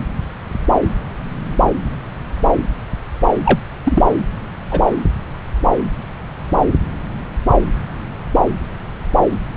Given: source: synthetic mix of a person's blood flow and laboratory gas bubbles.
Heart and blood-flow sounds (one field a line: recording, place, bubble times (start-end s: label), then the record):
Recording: Doppler ultrasound of blood flow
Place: subclavian vein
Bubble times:
3.45-3.59 s: bubbles
3.83-4.03 s: bubbles
4.71-4.81 s: bubbles
From the record:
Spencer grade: 1 (occasional bubble signal discernible with the cardiac motion signal, with majority of cardiac periods free of bubbles)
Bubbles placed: anywhere in the cardiac cycle